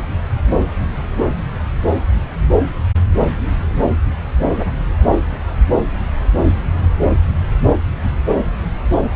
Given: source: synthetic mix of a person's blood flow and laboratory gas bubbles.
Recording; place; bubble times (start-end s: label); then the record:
Doppler ultrasound of blood flow; subclavian vein
4.56-4.71 s: bubbles
From the record:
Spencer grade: 1 (occasional bubble signal discernible with the cardiac motion signal, with majority of cardiac periods free of bubbles); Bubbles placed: anywhere in the cardiac cycle